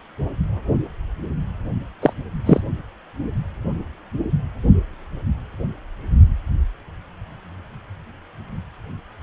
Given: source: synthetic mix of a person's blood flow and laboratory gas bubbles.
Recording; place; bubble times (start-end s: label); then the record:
Doppler ultrasound of blood flow; precordium
2.02-2.13 s: bubbles
2.46-2.60 s: bubbles
From the record:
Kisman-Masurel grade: 213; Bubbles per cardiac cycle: several, 3 to 8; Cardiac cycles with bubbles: 1 to 10%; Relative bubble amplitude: loud (0.450 to 0.775); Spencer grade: 1 (occasional bubble signal discernible with the cardiac motion signal, with majority of cardiac periods free of bubbles); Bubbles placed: only in the low amplitude regions of the cardiac cycle